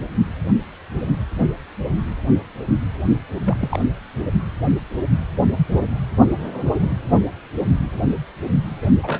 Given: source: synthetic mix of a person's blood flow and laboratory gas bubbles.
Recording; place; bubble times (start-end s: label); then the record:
Doppler ultrasound of blood flow; precordium
3.45-3.79 s: bubbles
8.81-8.89 s: bubbles
9.03-9.20 s: bubbles
From the record:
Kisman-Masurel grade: 222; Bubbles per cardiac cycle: several, 3 to 8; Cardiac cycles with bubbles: 10 to 50%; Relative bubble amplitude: moderate (0.250 to 0.450); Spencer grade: 2 (many but less than half of the cardiac periods contain bubble signals, singularly or in groups); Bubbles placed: anywhere in the cardiac cycle